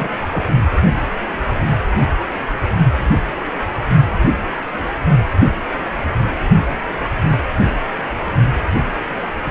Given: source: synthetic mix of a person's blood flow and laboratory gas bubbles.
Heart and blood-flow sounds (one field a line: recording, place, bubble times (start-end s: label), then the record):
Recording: Doppler ultrasound of blood flow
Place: precordium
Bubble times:
0.00-0.09 s: bubbles
0.32-0.44 s: bubbles
From the record:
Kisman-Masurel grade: 112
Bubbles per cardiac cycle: 1 to 2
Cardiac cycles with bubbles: 1 to 10%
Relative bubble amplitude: moderate (0.250 to 0.450)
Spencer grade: 1 (occasional bubble signal discernible with the cardiac motion signal, with majority of cardiac periods free of bubbles)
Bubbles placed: only in the low amplitude regions of the cardiac cycle